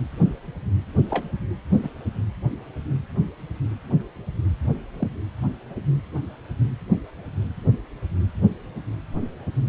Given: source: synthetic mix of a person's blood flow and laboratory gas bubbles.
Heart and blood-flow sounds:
Doppler ultrasound of blood flow; precordium
1.09-1.25 s: bubbles
1.82-1.90 s: bubbles
4.99-5.08 s: bubbles
From the record:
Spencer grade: 2 (many but less than half of the cardiac periods contain bubble signals, singularly or in groups); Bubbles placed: anywhere in the cardiac cycle

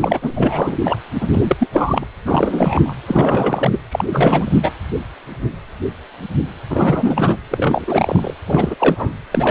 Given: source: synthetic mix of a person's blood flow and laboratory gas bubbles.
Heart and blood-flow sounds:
Doppler ultrasound of blood flow; precordium
0.00-0.19 s: bubbles
0.21-0.78 s: bubbles
0.83-0.97 s: bubbles
1.20-1.27 s: bubbles
1.32-1.57 s: bubbles
1.59-1.68 s: bubbles
1.72-2.06 s: bubbles
2.26-2.95 s: bubbles
3.08-3.80 s: bubbles
3.91-4.04 s: bubbles
4.12-4.72 s: bubbles
6.69-7.38 s: bubbles
7.51-7.84 s: bubbles
7.87-8.34 s: bubbles
8.47-8.75 s: bubbles
8.79-9.13 s: bubbles
9.31-9.51 s: bubbles
From the record:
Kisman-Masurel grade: 333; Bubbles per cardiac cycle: rolling drumbeat, 9 or more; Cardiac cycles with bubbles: 50 to 99%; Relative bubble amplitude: loud (0.450 to 0.775); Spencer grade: 3 (all of the cardiac periods contain showers or single bubble signals, but not dominating or overriding the cardiac motion signals); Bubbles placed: anywhere in the cardiac cycle

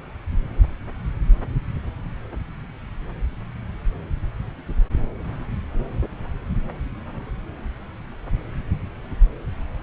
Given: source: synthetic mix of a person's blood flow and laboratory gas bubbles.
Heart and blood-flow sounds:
Doppler ultrasound of blood flow; subclavian vein
no bubbles
From the record:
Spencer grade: 0 (complete lack of bubble signals)

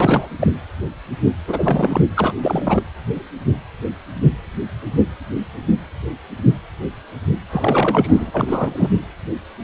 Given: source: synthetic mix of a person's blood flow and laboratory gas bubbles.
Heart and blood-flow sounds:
Doppler ultrasound of blood flow; precordium
0.00-0.29 s: bubbles
0.39-0.52 s: bubbles
1.48-2.01 s: bubbles
2.16-2.33 s: bubbles
2.42-2.83 s: bubbles
7.50-8.89 s: bubbles
From the record:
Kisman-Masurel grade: 332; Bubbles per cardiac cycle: rolling drumbeat, 9 or more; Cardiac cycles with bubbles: 50 to 99%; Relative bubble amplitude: moderate (0.250 to 0.450); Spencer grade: 3 (all of the cardiac periods contain showers or single bubble signals, but not dominating or overriding the cardiac motion signals); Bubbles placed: anywhere in the cardiac cycle

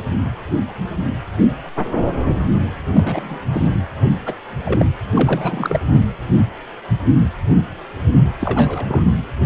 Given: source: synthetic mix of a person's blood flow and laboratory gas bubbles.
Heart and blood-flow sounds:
Doppler ultrasound of blood flow; precordium
2.94-3.40 s: bubbles
3.52-3.67 s: bubbles
4.25-4.34 s: bubbles
4.65-4.85 s: bubbles
5.13-5.80 s: bubbles
5.93-6.05 s: bubbles
8.40-9.03 s: bubbles
From the record:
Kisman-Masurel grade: 222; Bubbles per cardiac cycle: several, 3 to 8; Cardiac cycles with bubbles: 10 to 50%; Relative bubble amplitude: moderate (0.250 to 0.450); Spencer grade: 2 (many but less than half of the cardiac periods contain bubble signals, singularly or in groups); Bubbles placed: anywhere in the cardiac cycle

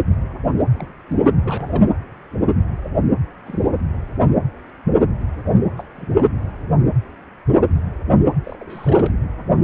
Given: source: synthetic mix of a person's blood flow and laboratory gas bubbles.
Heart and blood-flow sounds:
Doppler ultrasound of blood flow; precordium
0.73-0.92 s: bubbles
1.10-1.17 s: bubbles
1.44-1.84 s: bubbles
3.46-3.63 s: bubbles
5.77-5.83 s: bubbles
5.96-6.24 s: bubbles
8.44-9.14 s: bubbles
From the record:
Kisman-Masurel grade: 221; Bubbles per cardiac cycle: several, 3 to 8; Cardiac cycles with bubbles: 10 to 50%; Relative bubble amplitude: barely perceptible (0.100 to 0.250); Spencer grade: 2 (many but less than half of the cardiac periods contain bubble signals, singularly or in groups); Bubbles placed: anywhere in the cardiac cycle

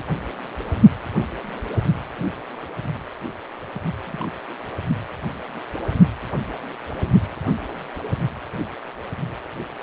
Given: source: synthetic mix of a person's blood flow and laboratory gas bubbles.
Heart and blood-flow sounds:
Doppler ultrasound of blood flow; precordium
4.04-4.31 s: bubbles
4.49-4.54 s: bubbles
From the record:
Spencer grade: 1 (occasional bubble signal discernible with the cardiac motion signal, with majority of cardiac periods free of bubbles); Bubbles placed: only in the low amplitude regions of the cardiac cycle

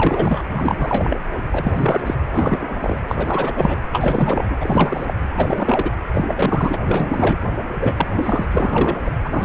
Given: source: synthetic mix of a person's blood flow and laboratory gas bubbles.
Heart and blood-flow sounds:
Doppler ultrasound of blood flow; precordium
0.00-0.42 s: bubbles
0.55-1.20 s: bubbles
1.51-1.73 s: bubbles
1.76-2.15 s: bubbles
2.32-3.02 s: bubbles
3.08-3.52 s: bubbles
3.55-3.77 s: bubbles
3.92-4.55 s: bubbles
4.60-5.14 s: bubbles
5.36-5.91 s: bubbles
6.13-6.76 s: bubbles
6.85-7.38 s: bubbles
7.80-8.07 s: bubbles
8.16-8.47 s: bubbles
8.51-8.97 s: bubbles
9.05-9.11 s: bubbles
9.24-9.28 s: bubbles
9.31-9.45 s: bubbles
From the record:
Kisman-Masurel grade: 343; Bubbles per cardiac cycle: rolling drumbeat, 9 or more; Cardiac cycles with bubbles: 100%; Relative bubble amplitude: loud (0.450 to 0.775); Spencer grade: 3 (all of the cardiac periods contain showers or single bubble signals, but not dominating or overriding the cardiac motion signals); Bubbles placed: anywhere in the cardiac cycle

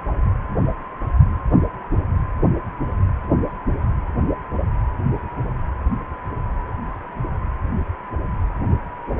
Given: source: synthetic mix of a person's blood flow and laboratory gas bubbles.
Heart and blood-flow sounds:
Doppler ultrasound of blood flow; precordium
no bubbles
From the record:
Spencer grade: 0 (complete lack of bubble signals)

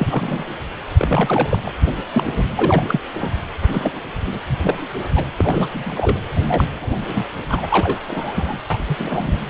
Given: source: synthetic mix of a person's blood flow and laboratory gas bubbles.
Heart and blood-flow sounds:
Doppler ultrasound of blood flow; precordium
0.00-0.44 s: bubbles
0.97-1.71 s: bubbles
1.86-1.92 s: bubbles
1.98-2.02 s: bubbles
2.11-2.45 s: bubbles
2.55-3.00 s: bubbles
3.13-3.31 s: bubbles
3.68-4.00 s: bubbles
4.27-4.39 s: bubbles
4.58-4.87 s: bubbles
5.16-5.25 s: bubbles
5.39-5.71 s: bubbles
5.74-6.20 s: bubbles
6.41-6.65 s: bubbles
6.81-7.00 s: bubbles
7.07-7.24 s: bubbles
7.49-7.67 s: bubbles
7.70-8.60 s: bubbles
8.70-8.77 s: bubbles
8.88-8.96 s: bubbles
8.98-9.37 s: bubbles
From the record:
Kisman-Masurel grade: 242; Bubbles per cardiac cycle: several, 3 to 8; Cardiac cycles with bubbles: 100%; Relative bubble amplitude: moderate (0.250 to 0.450); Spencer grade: 3 (all of the cardiac periods contain showers or single bubble signals, but not dominating or overriding the cardiac motion signals); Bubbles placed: anywhere in the cardiac cycle

